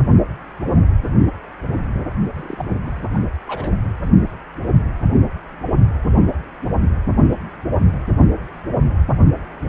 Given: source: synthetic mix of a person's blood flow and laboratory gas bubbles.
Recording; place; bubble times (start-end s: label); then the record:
Doppler ultrasound of blood flow; precordium
2.34-2.65 s: bubbles
2.84-3.08 s: bubbles
3.13-3.23 s: bubbles
3.48-3.71 s: bubbles
From the record:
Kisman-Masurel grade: 211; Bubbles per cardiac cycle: several, 3 to 8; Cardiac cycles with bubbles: 1 to 10%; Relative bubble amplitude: barely perceptible (0.100 to 0.250); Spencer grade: 1 (occasional bubble signal discernible with the cardiac motion signal, with majority of cardiac periods free of bubbles); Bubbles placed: only in the low amplitude regions of the cardiac cycle